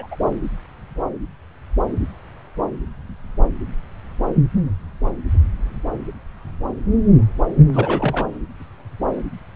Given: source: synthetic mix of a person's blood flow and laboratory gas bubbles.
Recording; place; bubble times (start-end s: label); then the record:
Doppler ultrasound of blood flow; subclavian vein
0.00-0.07 s: bubbles
0.11-0.15 s: bubbles
7.73-8.27 s: bubbles
From the record:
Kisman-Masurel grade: 222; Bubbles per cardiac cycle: several, 3 to 8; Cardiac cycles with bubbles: 10 to 50%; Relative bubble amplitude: moderate (0.250 to 0.450); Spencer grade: 2 (many but less than half of the cardiac periods contain bubble signals, singularly or in groups); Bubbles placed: anywhere in the cardiac cycle